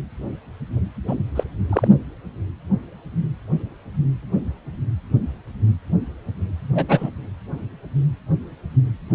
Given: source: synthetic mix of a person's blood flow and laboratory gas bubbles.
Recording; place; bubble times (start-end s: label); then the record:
Doppler ultrasound of blood flow; precordium
1.08-1.15 s: bubbles
1.35-1.44 s: bubbles
1.69-1.88 s: bubbles
6.75-7.10 s: bubbles
From the record:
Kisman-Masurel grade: 213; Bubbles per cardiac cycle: several, 3 to 8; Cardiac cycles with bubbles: 1 to 10%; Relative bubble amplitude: loud (0.450 to 0.775); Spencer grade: 1 (occasional bubble signal discernible with the cardiac motion signal, with majority of cardiac periods free of bubbles); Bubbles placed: anywhere in the cardiac cycle